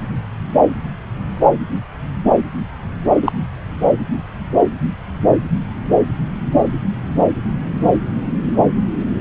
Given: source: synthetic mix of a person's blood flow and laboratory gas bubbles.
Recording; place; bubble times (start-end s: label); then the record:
Doppler ultrasound of blood flow; subclavian vein
3.22-3.32 s: bubbles
From the record:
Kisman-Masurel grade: 113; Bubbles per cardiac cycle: 1 to 2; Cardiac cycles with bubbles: 1 to 10%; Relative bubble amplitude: loud (0.450 to 0.775); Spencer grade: 1 (occasional bubble signal discernible with the cardiac motion signal, with majority of cardiac periods free of bubbles); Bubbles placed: anywhere in the cardiac cycle